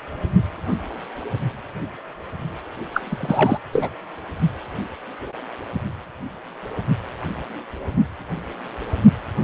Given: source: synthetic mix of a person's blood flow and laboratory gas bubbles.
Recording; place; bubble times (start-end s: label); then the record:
Doppler ultrasound of blood flow; precordium
2.94-3.58 s: bubbles
3.73-3.90 s: bubbles
From the record:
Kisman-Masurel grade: 222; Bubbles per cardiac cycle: several, 3 to 8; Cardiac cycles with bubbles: 10 to 50%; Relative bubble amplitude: moderate (0.250 to 0.450); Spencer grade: 2 (many but less than half of the cardiac periods contain bubble signals, singularly or in groups); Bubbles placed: anywhere in the cardiac cycle